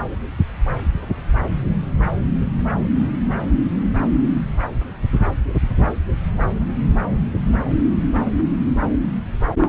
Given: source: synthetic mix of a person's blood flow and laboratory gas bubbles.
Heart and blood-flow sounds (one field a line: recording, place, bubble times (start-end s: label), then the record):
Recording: Doppler ultrasound of blood flow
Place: subclavian vein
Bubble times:
0.00-0.04 s: bubbles
From the record:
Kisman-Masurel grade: 113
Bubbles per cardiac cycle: 1 to 2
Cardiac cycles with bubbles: 1 to 10%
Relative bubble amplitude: loud (0.450 to 0.775)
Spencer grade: 1 (occasional bubble signal discernible with the cardiac motion signal, with majority of cardiac periods free of bubbles)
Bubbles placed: anywhere in the cardiac cycle